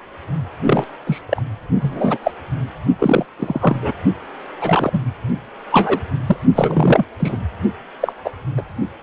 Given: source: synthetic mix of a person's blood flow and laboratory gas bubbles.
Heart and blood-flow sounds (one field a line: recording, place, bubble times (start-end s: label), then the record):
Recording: Doppler ultrasound of blood flow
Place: precordium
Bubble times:
0.65-0.84 s: bubbles
1.06-1.22 s: bubbles
1.29-1.43 s: bubbles
1.80-2.18 s: bubbles
2.23-2.32 s: bubbles
3.00-3.25 s: bubbles
3.39-3.92 s: bubbles
4.61-5.00 s: bubbles
5.71-6.00 s: bubbles
6.27-6.37 s: bubbles
6.54-7.06 s: bubbles
7.19-7.37 s: bubbles
8.00-8.12 s: bubbles
8.24-8.31 s: bubbles
8.57-8.62 s: bubbles
From the record:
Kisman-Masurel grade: 243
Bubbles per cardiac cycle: several, 3 to 8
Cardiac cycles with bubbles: 100%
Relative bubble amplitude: loud (0.450 to 0.775)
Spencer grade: 3 (all of the cardiac periods contain showers or single bubble signals, but not dominating or overriding the cardiac motion signals)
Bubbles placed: only in the low amplitude regions of the cardiac cycle